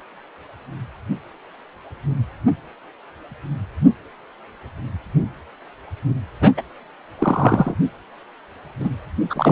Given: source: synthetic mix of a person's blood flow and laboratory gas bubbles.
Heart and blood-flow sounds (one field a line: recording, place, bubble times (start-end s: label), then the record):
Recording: Doppler ultrasound of blood flow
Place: precordium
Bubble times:
6.41-6.51 s: bubbles
6.57-6.62 s: bubbles
7.18-7.75 s: bubbles
8.79-8.89 s: bubbles
9.29-9.52 s: bubbles
From the record:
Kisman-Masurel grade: 223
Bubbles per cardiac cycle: several, 3 to 8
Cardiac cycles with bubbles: 10 to 50%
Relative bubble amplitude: loud (0.450 to 0.775)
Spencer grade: 2 (many but less than half of the cardiac periods contain bubble signals, singularly or in groups)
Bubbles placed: anywhere in the cardiac cycle